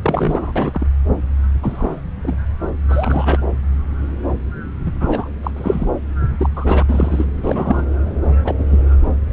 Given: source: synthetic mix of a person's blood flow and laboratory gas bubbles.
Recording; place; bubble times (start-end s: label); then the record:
Doppler ultrasound of blood flow; subclavian vein
0.02-0.52 s: bubbles
0.55-0.86 s: bubbles
1.62-2.02 s: bubbles
2.22-2.37 s: bubbles
2.89-3.38 s: bubbles
4.86-4.92 s: bubbles
5.00-5.30 s: bubbles
5.43-5.51 s: bubbles
5.56-5.87 s: bubbles
6.38-6.49 s: bubbles
6.56-6.83 s: bubbles
6.88-7.26 s: bubbles
7.44-7.86 s: bubbles
8.44-8.55 s: bubbles
8.59-8.64 s: bubbles
8.71-8.77 s: bubbles
From the record:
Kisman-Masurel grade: 233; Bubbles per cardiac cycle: several, 3 to 8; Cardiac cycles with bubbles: 50 to 99%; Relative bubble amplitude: loud (0.450 to 0.775); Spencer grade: 3 (all of the cardiac periods contain showers or single bubble signals, but not dominating or overriding the cardiac motion signals); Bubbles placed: anywhere in the cardiac cycle